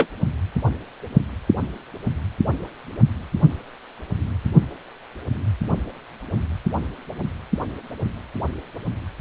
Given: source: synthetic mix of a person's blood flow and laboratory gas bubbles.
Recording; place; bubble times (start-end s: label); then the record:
Doppler ultrasound of blood flow; precordium
0.00-0.07 s: bubbles
From the record:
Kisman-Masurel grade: 213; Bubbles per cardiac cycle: several, 3 to 8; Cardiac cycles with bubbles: 1 to 10%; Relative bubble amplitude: loud (0.450 to 0.775); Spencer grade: 1 (occasional bubble signal discernible with the cardiac motion signal, with majority of cardiac periods free of bubbles); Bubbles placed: only in the low amplitude regions of the cardiac cycle